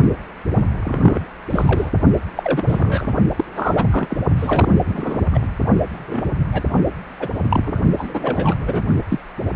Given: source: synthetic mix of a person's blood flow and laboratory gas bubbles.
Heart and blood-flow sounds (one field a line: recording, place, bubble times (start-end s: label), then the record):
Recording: Doppler ultrasound of blood flow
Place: precordium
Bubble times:
0.83-1.25 s: bubbles
1.50-1.91 s: bubbles
2.35-2.64 s: bubbles
2.68-3.12 s: bubbles
3.38-3.44 s: bubbles
3.55-3.84 s: bubbles
3.91-4.17 s: bubbles
4.37-4.73 s: bubbles
4.84-5.20 s: bubbles
5.32-5.41 s: bubbles
5.93-6.31 s: bubbles
6.52-6.63 s: bubbles
7.20-7.28 s: bubbles
7.49-7.82 s: bubbles
7.97-8.55 s: bubbles
8.61-8.84 s: bubbles
9.09-9.20 s: bubbles
From the record:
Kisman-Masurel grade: 242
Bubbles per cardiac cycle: several, 3 to 8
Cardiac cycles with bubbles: 100%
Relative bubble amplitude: moderate (0.250 to 0.450)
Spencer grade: 3 (all of the cardiac periods contain showers or single bubble signals, but not dominating or overriding the cardiac motion signals)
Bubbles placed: only in the low amplitude regions of the cardiac cycle